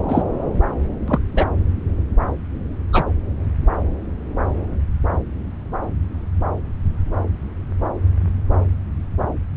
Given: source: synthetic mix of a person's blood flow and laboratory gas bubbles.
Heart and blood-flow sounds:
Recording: Doppler ultrasound of blood flow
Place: subclavian vein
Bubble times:
0.08-0.23 s: bubbles
1.07-1.19 s: bubbles
1.35-1.45 s: bubbles
2.92-3.04 s: bubbles
From the record:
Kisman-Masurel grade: 123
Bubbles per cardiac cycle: 1 to 2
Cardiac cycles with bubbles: 10 to 50%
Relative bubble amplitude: loud (0.450 to 0.775)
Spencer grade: 2 (many but less than half of the cardiac periods contain bubble signals, singularly or in groups)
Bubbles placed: anywhere in the cardiac cycle

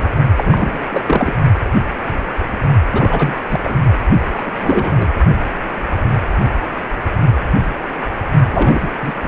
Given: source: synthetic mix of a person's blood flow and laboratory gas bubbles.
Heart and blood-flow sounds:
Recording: Doppler ultrasound of blood flow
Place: precordium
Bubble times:
0.00-0.09 s: bubbles
0.37-0.77 s: bubbles
0.91-1.02 s: bubbles
1.06-1.33 s: bubbles
2.92-3.37 s: bubbles
3.50-3.60 s: bubbles
3.63-3.75 s: bubbles
4.34-5.07 s: bubbles
8.48-8.89 s: bubbles
9.02-9.12 s: bubbles
9.22-9.28 s: bubbles
From the record:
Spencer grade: 3 (all of the cardiac periods contain showers or single bubble signals, but not dominating or overriding the cardiac motion signals)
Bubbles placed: only in the low amplitude regions of the cardiac cycle

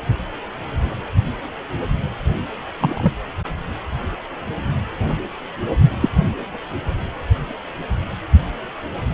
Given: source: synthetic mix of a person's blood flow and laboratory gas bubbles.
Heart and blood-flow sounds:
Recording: Doppler ultrasound of blood flow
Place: precordium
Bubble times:
2.80-3.12 s: bubbles
6.01-6.09 s: bubbles
From the record:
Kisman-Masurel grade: 123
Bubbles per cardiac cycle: 1 to 2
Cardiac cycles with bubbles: 10 to 50%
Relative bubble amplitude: loud (0.450 to 0.775)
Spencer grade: 2 (many but less than half of the cardiac periods contain bubble signals, singularly or in groups)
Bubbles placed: anywhere in the cardiac cycle

